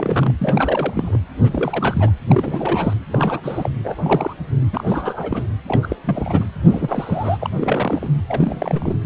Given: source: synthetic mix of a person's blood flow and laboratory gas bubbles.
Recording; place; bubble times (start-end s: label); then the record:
Doppler ultrasound of blood flow; precordium
0.00-0.35 s: bubbles
0.39-1.19 s: bubbles
1.39-2.12 s: bubbles
2.29-2.94 s: bubbles
3.09-3.70 s: bubbles
3.83-4.33 s: bubbles
4.72-5.47 s: bubbles
5.67-5.96 s: bubbles
6.04-6.46 s: bubbles
6.65-7.50 s: bubbles
7.55-8.08 s: bubbles
8.28-8.96 s: bubbles
From the record:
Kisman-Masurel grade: 332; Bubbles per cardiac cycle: rolling drumbeat, 9 or more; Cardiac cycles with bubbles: 50 to 99%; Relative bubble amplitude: moderate (0.250 to 0.450); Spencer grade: 3 (all of the cardiac periods contain showers or single bubble signals, but not dominating or overriding the cardiac motion signals); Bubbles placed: anywhere in the cardiac cycle